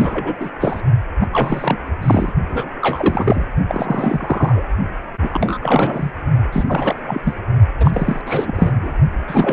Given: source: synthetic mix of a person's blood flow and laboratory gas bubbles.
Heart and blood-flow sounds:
Doppler ultrasound of blood flow; precordium
0.00-0.36 s: bubbles
0.40-0.50 s: bubbles
0.59-0.82 s: bubbles
1.20-1.26 s: bubbles
1.32-1.77 s: bubbles
2.02-2.33 s: bubbles
2.49-2.71 s: bubbles
2.81-3.48 s: bubbles
3.68-4.64 s: bubbles
5.21-5.58 s: bubbles
5.60-6.13 s: bubbles
6.52-6.64 s: bubbles
6.67-7.03 s: bubbles
7.06-7.21 s: bubbles
7.23-7.34 s: bubbles
7.79-7.91 s: bubbles
7.94-8.21 s: bubbles
8.25-8.97 s: bubbles
9.28-9.53 s: bubbles
From the record:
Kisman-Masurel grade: 343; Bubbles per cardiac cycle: rolling drumbeat, 9 or more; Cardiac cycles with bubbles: 100%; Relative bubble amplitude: loud (0.450 to 0.775); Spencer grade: 3 (all of the cardiac periods contain showers or single bubble signals, but not dominating or overriding the cardiac motion signals); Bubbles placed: only in the low amplitude regions of the cardiac cycle

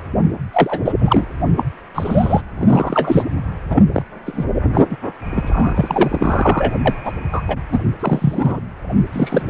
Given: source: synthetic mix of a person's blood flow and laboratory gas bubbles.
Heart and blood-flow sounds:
Doppler ultrasound of blood flow; precordium
0.52-0.80 s: bubbles
0.84-0.93 s: bubbles
0.99-1.25 s: bubbles
1.56-1.64 s: bubbles
1.95-2.42 s: bubbles
2.58-3.24 s: bubbles
3.69-3.83 s: bubbles
3.94-4.03 s: bubbles
4.25-4.44 s: bubbles
4.73-4.81 s: bubbles
4.89-4.96 s: bubbles
5.31-6.72 s: bubbles
6.84-6.95 s: bubbles
7.04-7.12 s: bubbles
7.31-7.42 s: bubbles
7.47-7.57 s: bubbles
7.71-7.80 s: bubbles
7.99-8.60 s: bubbles
9.12-9.42 s: bubbles
From the record:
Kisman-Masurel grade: 243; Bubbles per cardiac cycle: several, 3 to 8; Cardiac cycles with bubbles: 100%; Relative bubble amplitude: loud (0.450 to 0.775); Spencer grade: 3 (all of the cardiac periods contain showers or single bubble signals, but not dominating or overriding the cardiac motion signals); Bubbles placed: anywhere in the cardiac cycle

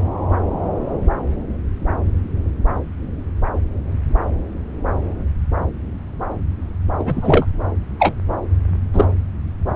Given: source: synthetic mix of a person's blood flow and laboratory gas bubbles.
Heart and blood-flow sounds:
Doppler ultrasound of blood flow; subclavian vein
6.97-7.46 s: bubbles
7.99-8.14 s: bubbles
8.93-9.06 s: bubbles
From the record:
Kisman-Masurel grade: 123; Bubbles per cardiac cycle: 1 to 2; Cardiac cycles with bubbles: 10 to 50%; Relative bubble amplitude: loud (0.450 to 0.775); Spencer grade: 2 (many but less than half of the cardiac periods contain bubble signals, singularly or in groups); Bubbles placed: anywhere in the cardiac cycle

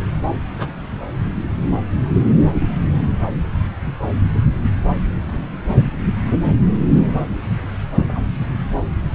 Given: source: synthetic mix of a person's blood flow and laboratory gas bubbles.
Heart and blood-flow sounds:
Doppler ultrasound of blood flow; subclavian vein
0.57-0.73 s: bubbles
2.53-2.69 s: bubbles
8.08-8.22 s: bubbles
From the record:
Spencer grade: 2 (many but less than half of the cardiac periods contain bubble signals, singularly or in groups); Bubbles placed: anywhere in the cardiac cycle

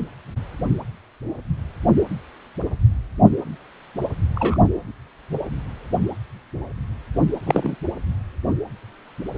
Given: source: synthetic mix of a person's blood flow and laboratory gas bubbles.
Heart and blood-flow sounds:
Doppler ultrasound of blood flow; precordium
4.36-4.68 s: bubbles
7.46-7.76 s: bubbles
From the record:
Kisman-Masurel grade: 112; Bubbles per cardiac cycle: 1 to 2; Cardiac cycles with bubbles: 1 to 10%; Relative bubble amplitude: moderate (0.250 to 0.450); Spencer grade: 1 (occasional bubble signal discernible with the cardiac motion signal, with majority of cardiac periods free of bubbles); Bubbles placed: anywhere in the cardiac cycle

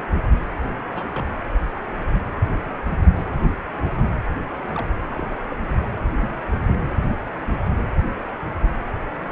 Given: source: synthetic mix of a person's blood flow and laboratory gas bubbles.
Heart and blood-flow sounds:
Doppler ultrasound of blood flow; precordium
0.00-0.04 s: bubbles
0.87-1.09 s: bubbles
1.12-1.29 s: bubbles
4.75-4.89 s: bubbles
5.16-5.25 s: bubbles
5.50-5.57 s: bubbles
6.19-6.43 s: bubbles
From the record:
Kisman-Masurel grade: 121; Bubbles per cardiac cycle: 1 to 2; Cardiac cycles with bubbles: 10 to 50%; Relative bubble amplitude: barely perceptible (0.100 to 0.250); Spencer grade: 2 (many but less than half of the cardiac periods contain bubble signals, singularly or in groups); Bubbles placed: anywhere in the cardiac cycle

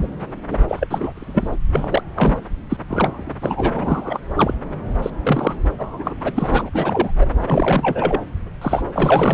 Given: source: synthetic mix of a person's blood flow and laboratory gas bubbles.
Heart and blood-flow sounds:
Doppler ultrasound of blood flow; subclavian vein
0.00-0.07 s: bubbles
0.49-0.58 s: bubbles
0.68-0.87 s: bubbles
0.90-1.57 s: bubbles
1.75-2.02 s: bubbles
2.15-2.38 s: bubbles
2.69-2.77 s: bubbles
2.88-3.33 s: bubbles
3.41-4.20 s: bubbles
4.34-4.54 s: bubbles
5.02-5.10 s: bubbles
5.23-5.55 s: bubbles
5.79-6.14 s: bubbles
6.21-6.70 s: bubbles
6.73-7.12 s: bubbles
7.17-7.26 s: bubbles
7.46-8.20 s: bubbles
8.61-8.82 s: bubbles
8.94-9.34 s: bubbles
From the record:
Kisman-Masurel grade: 332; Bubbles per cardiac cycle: rolling drumbeat, 9 or more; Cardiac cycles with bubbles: 50 to 99%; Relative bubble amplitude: moderate (0.250 to 0.450); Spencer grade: 3 (all of the cardiac periods contain showers or single bubble signals, but not dominating or overriding the cardiac motion signals); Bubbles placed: anywhere in the cardiac cycle

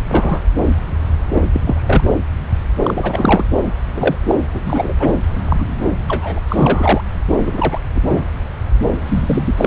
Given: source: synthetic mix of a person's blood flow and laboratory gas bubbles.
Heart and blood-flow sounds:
Doppler ultrasound of blood flow; subclavian vein
0.09-0.40 s: bubbles
1.33-1.42 s: bubbles
1.53-1.61 s: bubbles
1.65-2.04 s: bubbles
2.83-3.45 s: bubbles
3.93-4.15 s: bubbles
4.29-4.35 s: bubbles
4.51-4.94 s: bubbles
4.99-5.14 s: bubbles
5.45-5.65 s: bubbles
5.79-5.88 s: bubbles
6.08-6.39 s: bubbles
6.48-7.01 s: bubbles
7.32-7.80 s: bubbles
7.95-8.01 s: bubbles
8.10-8.22 s: bubbles
9.06-9.67 s: bubbles
From the record:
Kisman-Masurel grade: 233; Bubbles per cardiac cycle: several, 3 to 8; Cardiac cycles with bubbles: 50 to 99%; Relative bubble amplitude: loud (0.450 to 0.775); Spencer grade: 3 (all of the cardiac periods contain showers or single bubble signals, but not dominating or overriding the cardiac motion signals); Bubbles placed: anywhere in the cardiac cycle

